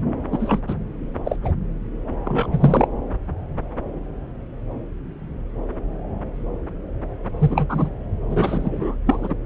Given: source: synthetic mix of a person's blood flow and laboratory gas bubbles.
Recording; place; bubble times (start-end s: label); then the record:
Doppler ultrasound of blood flow; subclavian vein
0.32-0.61 s: bubbles
0.67-0.75 s: bubbles
1.25-1.36 s: bubbles
1.43-1.51 s: bubbles
2.25-2.87 s: bubbles
7.40-7.90 s: bubbles
8.29-8.96 s: bubbles
9.06-9.34 s: bubbles
From the record:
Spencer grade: 2 (many but less than half of the cardiac periods contain bubble signals, singularly or in groups); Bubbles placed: anywhere in the cardiac cycle